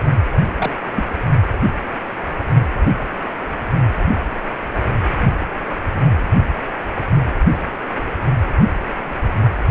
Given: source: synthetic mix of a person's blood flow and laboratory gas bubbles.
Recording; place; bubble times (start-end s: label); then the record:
Doppler ultrasound of blood flow; precordium
0.33-0.36 s: bubbles
0.58-0.71 s: bubbles
0.95-1.06 s: bubbles
From the record:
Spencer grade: 1 (occasional bubble signal discernible with the cardiac motion signal, with majority of cardiac periods free of bubbles); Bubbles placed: anywhere in the cardiac cycle